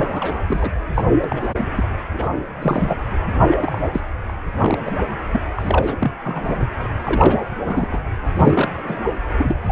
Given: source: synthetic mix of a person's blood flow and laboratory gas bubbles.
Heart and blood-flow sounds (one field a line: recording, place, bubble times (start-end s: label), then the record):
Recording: Doppler ultrasound of blood flow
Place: precordium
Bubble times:
0.00-0.37 s: bubbles
0.47-0.71 s: bubbles
0.94-1.04 s: bubbles
1.20-1.55 s: bubbles
1.58-1.67 s: bubbles
1.76-1.89 s: bubbles
2.13-2.29 s: bubbles
2.62-3.00 s: bubbles
3.50-3.58 s: bubbles
3.60-4.01 s: bubbles
4.29-4.33 s: bubbles
4.60-4.78 s: bubbles
4.85-4.92 s: bubbles
5.33-5.42 s: bubbles
5.56-5.96 s: bubbles
6.00-6.11 s: bubbles
6.23-6.60 s: bubbles
7.04-7.38 s: bubbles
7.65-8.02 s: bubbles
8.35-8.70 s: bubbles
8.77-9.01 s: bubbles
9.38-9.54 s: bubbles
9.69-9.72 s: bubbles
From the record:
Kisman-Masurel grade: 342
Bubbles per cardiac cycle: rolling drumbeat, 9 or more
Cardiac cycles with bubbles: 100%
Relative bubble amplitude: moderate (0.250 to 0.450)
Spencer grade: 3 (all of the cardiac periods contain showers or single bubble signals, but not dominating or overriding the cardiac motion signals)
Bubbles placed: anywhere in the cardiac cycle